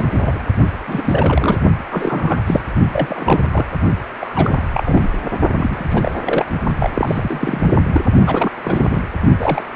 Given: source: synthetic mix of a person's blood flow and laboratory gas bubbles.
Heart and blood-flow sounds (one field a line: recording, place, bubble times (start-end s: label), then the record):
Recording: Doppler ultrasound of blood flow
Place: precordium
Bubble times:
0.00-0.42 s: bubbles
0.87-1.58 s: bubbles
1.91-2.41 s: bubbles
2.46-2.62 s: bubbles
2.93-3.43 s: bubbles
3.51-3.67 s: bubbles
4.21-4.68 s: bubbles
4.72-5.09 s: bubbles
5.52-5.84 s: bubbles
5.89-6.21 s: bubbles
6.25-6.46 s: bubbles
6.79-6.90 s: bubbles
6.94-7.75 s: bubbles
7.94-8.02 s: bubbles
8.25-8.49 s: bubbles
8.63-9.00 s: bubbles
9.39-9.62 s: bubbles
From the record:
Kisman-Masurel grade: 342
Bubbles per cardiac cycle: rolling drumbeat, 9 or more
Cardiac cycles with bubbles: 100%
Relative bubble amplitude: moderate (0.250 to 0.450)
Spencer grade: 3 (all of the cardiac periods contain showers or single bubble signals, but not dominating or overriding the cardiac motion signals)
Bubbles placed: only in the low amplitude regions of the cardiac cycle